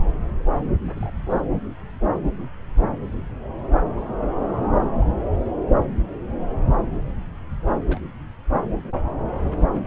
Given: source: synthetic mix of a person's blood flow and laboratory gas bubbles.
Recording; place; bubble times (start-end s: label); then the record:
Doppler ultrasound of blood flow; subclavian vein
0.85-1.13 s: bubbles
1.30-1.41 s: bubbles
7.90-8.01 s: bubbles
9.41-9.80 s: bubbles
9.85-9.87 s: bubbles
From the record:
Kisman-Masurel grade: 121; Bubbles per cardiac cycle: 1 to 2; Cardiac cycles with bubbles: 10 to 50%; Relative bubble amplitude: barely perceptible (0.100 to 0.250); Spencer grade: 2 (many but less than half of the cardiac periods contain bubble signals, singularly or in groups); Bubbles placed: anywhere in the cardiac cycle